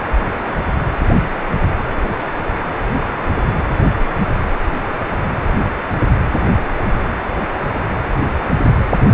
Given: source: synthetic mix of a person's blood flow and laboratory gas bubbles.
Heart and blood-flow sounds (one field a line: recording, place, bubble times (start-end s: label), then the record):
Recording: Doppler ultrasound of blood flow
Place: precordium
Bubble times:
no bubbles
From the record:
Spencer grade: 0 (complete lack of bubble signals)